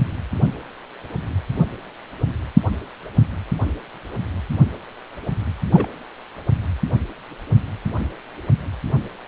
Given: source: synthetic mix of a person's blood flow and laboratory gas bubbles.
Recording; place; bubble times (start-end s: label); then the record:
Doppler ultrasound of blood flow; precordium
5.74-5.88 s: bubbles
From the record:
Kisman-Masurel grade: 112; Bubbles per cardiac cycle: 1 to 2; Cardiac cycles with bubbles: 1 to 10%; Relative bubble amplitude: moderate (0.250 to 0.450); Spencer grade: 1 (occasional bubble signal discernible with the cardiac motion signal, with majority of cardiac periods free of bubbles); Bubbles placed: anywhere in the cardiac cycle